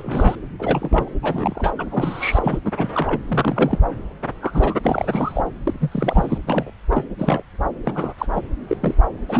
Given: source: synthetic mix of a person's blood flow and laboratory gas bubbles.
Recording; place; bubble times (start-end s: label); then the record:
Doppler ultrasound of blood flow; subclavian vein
0.00-0.35 s: bubbles
0.59-1.09 s: bubbles
1.23-1.72 s: bubbles
1.77-1.85 s: bubbles
1.90-2.59 s: bubbles
2.64-2.71 s: bubbles
2.76-3.21 s: bubbles
3.28-3.79 s: bubbles
4.41-4.75 s: bubbles
4.83-5.43 s: bubbles
5.65-5.74 s: bubbles
5.80-6.38 s: bubbles
6.47-6.71 s: bubbles
6.92-7.04 s: bubbles
7.18-7.42 s: bubbles
7.84-8.13 s: bubbles
8.18-8.26 s: bubbles
8.35-8.41 s: bubbles
8.69-8.77 s: bubbles
8.81-8.95 s: bubbles
9.29-9.40 s: bubbles
From the record:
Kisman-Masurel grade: 232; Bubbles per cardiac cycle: several, 3 to 8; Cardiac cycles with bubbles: 50 to 99%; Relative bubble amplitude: moderate (0.250 to 0.450); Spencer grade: 3 (all of the cardiac periods contain showers or single bubble signals, but not dominating or overriding the cardiac motion signals); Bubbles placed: anywhere in the cardiac cycle